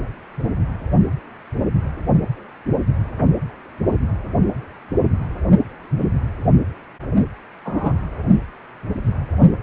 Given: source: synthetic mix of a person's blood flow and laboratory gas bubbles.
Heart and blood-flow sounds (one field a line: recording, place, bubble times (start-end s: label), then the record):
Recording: Doppler ultrasound of blood flow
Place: precordium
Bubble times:
7.65-7.93 s: bubbles
From the record:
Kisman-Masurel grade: 122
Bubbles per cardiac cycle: 1 to 2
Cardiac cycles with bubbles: 10 to 50%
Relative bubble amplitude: moderate (0.250 to 0.450)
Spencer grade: 2 (many but less than half of the cardiac periods contain bubble signals, singularly or in groups)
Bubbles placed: only in the low amplitude regions of the cardiac cycle